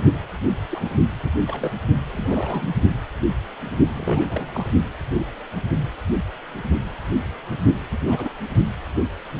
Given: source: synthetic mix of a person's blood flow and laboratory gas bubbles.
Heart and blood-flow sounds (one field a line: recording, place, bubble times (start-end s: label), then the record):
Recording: Doppler ultrasound of blood flow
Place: precordium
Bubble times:
0.71-0.89 s: bubbles
1.23-1.31 s: bubbles
1.46-1.71 s: bubbles
2.12-2.69 s: bubbles
3.95-4.70 s: bubbles
8.07-8.30 s: bubbles
From the record:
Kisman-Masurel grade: 221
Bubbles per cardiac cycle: several, 3 to 8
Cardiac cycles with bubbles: 10 to 50%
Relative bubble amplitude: barely perceptible (0.100 to 0.250)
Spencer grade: 2 (many but less than half of the cardiac periods contain bubble signals, singularly or in groups)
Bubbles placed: only in the low amplitude regions of the cardiac cycle